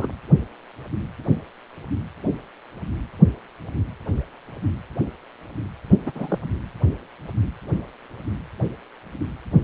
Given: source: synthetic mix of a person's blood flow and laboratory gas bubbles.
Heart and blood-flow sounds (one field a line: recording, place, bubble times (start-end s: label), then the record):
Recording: Doppler ultrasound of blood flow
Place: precordium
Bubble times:
0.00-0.07 s: bubbles
6.06-6.12 s: bubbles
6.15-6.39 s: bubbles
From the record:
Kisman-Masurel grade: 212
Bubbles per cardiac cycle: several, 3 to 8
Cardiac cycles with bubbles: 1 to 10%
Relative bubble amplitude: moderate (0.250 to 0.450)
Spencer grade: 1 (occasional bubble signal discernible with the cardiac motion signal, with majority of cardiac periods free of bubbles)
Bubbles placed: anywhere in the cardiac cycle